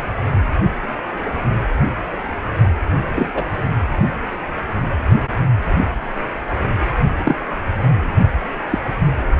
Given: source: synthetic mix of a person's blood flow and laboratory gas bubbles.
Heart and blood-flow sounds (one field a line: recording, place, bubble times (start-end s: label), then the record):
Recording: Doppler ultrasound of blood flow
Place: precordium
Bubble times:
3.15-3.31 s: bubbles
3.33-3.43 s: bubbles
7.25-7.36 s: bubbles
8.70-8.79 s: bubbles
From the record:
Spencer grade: 2 (many but less than half of the cardiac periods contain bubble signals, singularly or in groups)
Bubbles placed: only in the low amplitude regions of the cardiac cycle